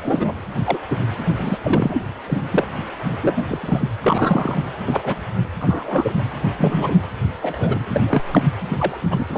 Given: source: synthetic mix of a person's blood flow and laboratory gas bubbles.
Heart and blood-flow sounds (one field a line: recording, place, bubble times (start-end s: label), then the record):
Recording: Doppler ultrasound of blood flow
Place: precordium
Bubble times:
0.02-0.36 s: bubbles
0.65-0.79 s: bubbles
0.91-0.99 s: bubbles
1.36-1.58 s: bubbles
1.64-2.05 s: bubbles
2.26-2.38 s: bubbles
2.50-2.65 s: bubbles
3.22-3.46 s: bubbles
3.49-3.91 s: bubbles
4.01-4.60 s: bubbles
4.86-5.25 s: bubbles
5.60-6.12 s: bubbles
6.58-6.94 s: bubbles
7.42-7.83 s: bubbles
7.91-8.22 s: bubbles
8.33-8.42 s: bubbles
8.70-8.98 s: bubbles
9.11-9.25 s: bubbles
9.29-9.38 s: bubbles
From the record:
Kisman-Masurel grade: 242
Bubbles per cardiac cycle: several, 3 to 8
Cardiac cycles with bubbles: 100%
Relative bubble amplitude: moderate (0.250 to 0.450)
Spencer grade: 3 (all of the cardiac periods contain showers or single bubble signals, but not dominating or overriding the cardiac motion signals)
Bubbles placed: anywhere in the cardiac cycle